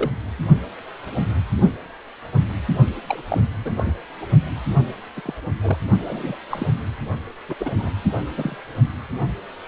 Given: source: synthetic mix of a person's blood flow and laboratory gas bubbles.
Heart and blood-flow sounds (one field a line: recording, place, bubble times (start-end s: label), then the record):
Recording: Doppler ultrasound of blood flow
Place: precordium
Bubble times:
0.00-0.10 s: bubbles
3.08-3.20 s: bubbles
3.29-3.42 s: bubbles
3.64-3.92 s: bubbles
4.21-4.25 s: bubbles
5.17-5.21 s: bubbles
5.25-5.34 s: bubbles
5.61-5.77 s: bubbles
6.00-6.36 s: bubbles
6.50-6.67 s: bubbles
7.48-7.54 s: bubbles
7.59-7.72 s: bubbles
7.76-7.90 s: bubbles
8.38-8.56 s: bubbles
From the record:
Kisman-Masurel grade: 232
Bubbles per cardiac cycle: several, 3 to 8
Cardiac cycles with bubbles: 50 to 99%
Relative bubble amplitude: moderate (0.250 to 0.450)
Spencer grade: 3 (all of the cardiac periods contain showers or single bubble signals, but not dominating or overriding the cardiac motion signals)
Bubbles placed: only in the low amplitude regions of the cardiac cycle